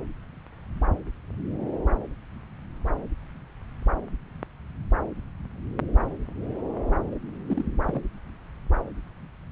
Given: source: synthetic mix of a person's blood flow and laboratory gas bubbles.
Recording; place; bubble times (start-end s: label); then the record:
Doppler ultrasound of blood flow; subclavian vein
7.11-7.16 s: bubbles
7.46-7.64 s: bubbles
7.84-8.02 s: bubbles
From the record:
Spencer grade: 1 (occasional bubble signal discernible with the cardiac motion signal, with majority of cardiac periods free of bubbles); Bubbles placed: anywhere in the cardiac cycle